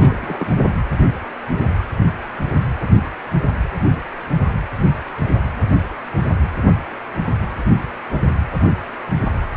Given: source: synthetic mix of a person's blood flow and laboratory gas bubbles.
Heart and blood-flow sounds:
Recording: Doppler ultrasound of blood flow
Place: precordium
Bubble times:
0.00-0.73 s: bubbles
From the record:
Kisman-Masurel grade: 222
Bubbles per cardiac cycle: several, 3 to 8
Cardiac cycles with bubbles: 10 to 50%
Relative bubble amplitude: moderate (0.250 to 0.450)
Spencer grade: 2 (many but less than half of the cardiac periods contain bubble signals, singularly or in groups)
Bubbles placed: anywhere in the cardiac cycle

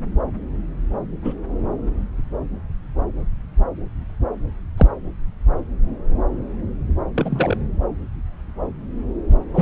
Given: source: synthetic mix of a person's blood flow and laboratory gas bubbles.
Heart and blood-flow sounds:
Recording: Doppler ultrasound of blood flow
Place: subclavian vein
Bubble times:
1.24-1.34 s: bubbles
4.77-4.86 s: bubbles
7.14-7.57 s: bubbles
9.54-9.62 s: bubbles
From the record:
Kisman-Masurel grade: 123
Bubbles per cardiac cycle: 1 to 2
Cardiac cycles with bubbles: 10 to 50%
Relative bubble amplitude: loud (0.450 to 0.775)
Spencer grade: 2 (many but less than half of the cardiac periods contain bubble signals, singularly or in groups)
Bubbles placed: anywhere in the cardiac cycle

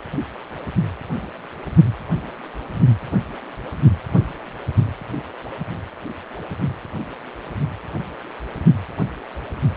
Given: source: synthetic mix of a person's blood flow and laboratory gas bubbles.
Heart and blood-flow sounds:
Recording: Doppler ultrasound of blood flow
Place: precordium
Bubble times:
no bubbles
From the record:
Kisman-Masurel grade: 000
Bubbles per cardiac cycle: 0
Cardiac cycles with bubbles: 0%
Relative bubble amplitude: no bubbles discernible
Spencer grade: 0 (complete lack of bubble signals)

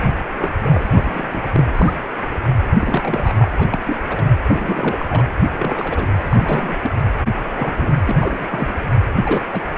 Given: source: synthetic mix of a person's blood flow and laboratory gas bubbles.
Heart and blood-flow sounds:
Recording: Doppler ultrasound of blood flow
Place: precordium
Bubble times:
0.36-0.53 s: bubbles
0.63-1.42 s: bubbles
1.52-1.61 s: bubbles
1.74-1.94 s: bubbles
2.34-2.39 s: bubbles
2.80-3.33 s: bubbles
3.36-3.51 s: bubbles
3.58-3.67 s: bubbles
3.70-3.80 s: bubbles
3.84-3.97 s: bubbles
4.09-4.23 s: bubbles
4.48-5.06 s: bubbles
5.10-5.25 s: bubbles
5.58-6.08 s: bubbles
6.30-6.79 s: bubbles
6.82-6.91 s: bubbles
7.48-7.95 s: bubbles
8.05-8.47 s: bubbles
8.52-8.73 s: bubbles
9.21-9.61 s: bubbles
From the record:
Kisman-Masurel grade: 242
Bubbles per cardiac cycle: several, 3 to 8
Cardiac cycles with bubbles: 100%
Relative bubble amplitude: moderate (0.250 to 0.450)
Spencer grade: 3 (all of the cardiac periods contain showers or single bubble signals, but not dominating or overriding the cardiac motion signals)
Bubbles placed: anywhere in the cardiac cycle

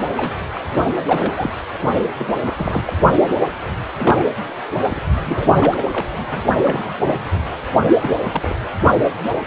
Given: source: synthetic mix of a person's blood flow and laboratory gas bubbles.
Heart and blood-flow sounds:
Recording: Doppler ultrasound of blood flow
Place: precordium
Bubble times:
0.00-0.02 s: bubbles
0.17-0.30 s: bubbles
0.54-0.61 s: bubbles
1.07-1.52 s: bubbles
2.19-2.25 s: bubbles
2.42-2.83 s: bubbles
2.87-2.92 s: bubbles
3.97-4.25 s: bubbles
4.90-5.01 s: bubbles
5.25-5.55 s: bubbles
5.58-5.85 s: bubbles
5.90-6.06 s: bubbles
6.14-6.39 s: bubbles
6.62-7.15 s: bubbles
7.84-7.94 s: bubbles
8.00-8.11 s: bubbles
8.32-8.56 s: bubbles
From the record:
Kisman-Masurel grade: 242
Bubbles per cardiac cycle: several, 3 to 8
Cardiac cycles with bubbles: 100%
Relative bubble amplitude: moderate (0.250 to 0.450)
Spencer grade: 3 (all of the cardiac periods contain showers or single bubble signals, but not dominating or overriding the cardiac motion signals)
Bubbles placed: only in the low amplitude regions of the cardiac cycle

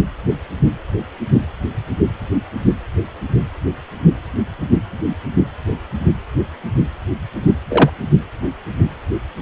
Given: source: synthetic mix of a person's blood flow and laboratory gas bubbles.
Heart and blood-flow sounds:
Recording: Doppler ultrasound of blood flow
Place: precordium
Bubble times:
7.68-7.90 s: bubbles
From the record:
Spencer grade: 1 (occasional bubble signal discernible with the cardiac motion signal, with majority of cardiac periods free of bubbles)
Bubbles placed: anywhere in the cardiac cycle

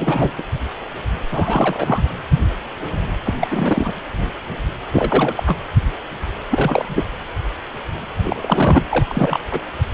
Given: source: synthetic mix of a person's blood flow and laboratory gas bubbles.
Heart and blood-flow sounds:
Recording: Doppler ultrasound of blood flow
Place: precordium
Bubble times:
0.00-0.30 s: bubbles
0.38-0.42 s: bubbles
1.31-2.05 s: bubbles
3.24-3.34 s: bubbles
3.40-3.94 s: bubbles
4.91-5.44 s: bubbles
5.46-5.58 s: bubbles
6.51-7.04 s: bubbles
8.23-8.86 s: bubbles
8.90-9.40 s: bubbles
9.51-9.61 s: bubbles
From the record:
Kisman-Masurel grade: 333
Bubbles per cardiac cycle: rolling drumbeat, 9 or more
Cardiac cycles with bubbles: 50 to 99%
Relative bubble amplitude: loud (0.450 to 0.775)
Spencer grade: 3 (all of the cardiac periods contain showers or single bubble signals, but not dominating or overriding the cardiac motion signals)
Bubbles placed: anywhere in the cardiac cycle

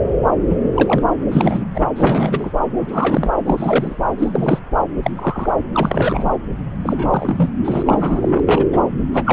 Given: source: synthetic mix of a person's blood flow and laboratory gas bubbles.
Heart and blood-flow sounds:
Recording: Doppler ultrasound of blood flow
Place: subclavian vein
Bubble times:
0.49-0.56 s: bubbles
0.74-1.02 s: bubbles
1.30-1.64 s: bubbles
1.75-1.81 s: bubbles
1.96-2.51 s: bubbles
2.77-3.31 s: bubbles
3.45-3.97 s: bubbles
4.18-4.59 s: bubbles
5.03-5.11 s: bubbles
5.16-5.50 s: bubbles
5.72-6.25 s: bubbles
6.83-7.49 s: bubbles
7.64-8.40 s: bubbles
8.46-8.65 s: bubbles
8.72-8.88 s: bubbles
9.13-9.33 s: bubbles
From the record:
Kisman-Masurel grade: 233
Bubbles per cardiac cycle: several, 3 to 8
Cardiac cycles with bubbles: 50 to 99%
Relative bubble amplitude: loud (0.450 to 0.775)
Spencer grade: 3 (all of the cardiac periods contain showers or single bubble signals, but not dominating or overriding the cardiac motion signals)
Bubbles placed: anywhere in the cardiac cycle

